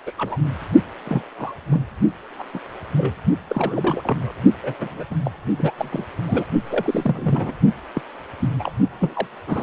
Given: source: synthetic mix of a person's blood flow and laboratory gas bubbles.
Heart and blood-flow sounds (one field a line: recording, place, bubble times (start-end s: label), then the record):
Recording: Doppler ultrasound of blood flow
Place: precordium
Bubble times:
0.06-0.12 s: bubbles
0.17-0.37 s: bubbles
1.05-1.22 s: bubbles
1.38-1.53 s: bubbles
1.71-1.82 s: bubbles
2.39-2.43 s: bubbles
2.54-2.59 s: bubbles
2.97-3.14 s: bubbles
3.49-4.33 s: bubbles
4.61-5.04 s: bubbles
5.10-5.15 s: bubbles
5.25-5.31 s: bubbles
5.57-5.73 s: bubbles
5.78-6.05 s: bubbles
6.27-6.44 s: bubbles
6.70-7.54 s: bubbles
7.93-8.01 s: bubbles
8.40-8.49 s: bubbles
8.59-8.71 s: bubbles
9.00-9.27 s: bubbles
9.47-9.63 s: bubbles
From the record:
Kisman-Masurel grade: 242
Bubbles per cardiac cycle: several, 3 to 8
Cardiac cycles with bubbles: 100%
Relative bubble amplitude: moderate (0.250 to 0.450)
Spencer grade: 3 (all of the cardiac periods contain showers or single bubble signals, but not dominating or overriding the cardiac motion signals)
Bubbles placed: only in the low amplitude regions of the cardiac cycle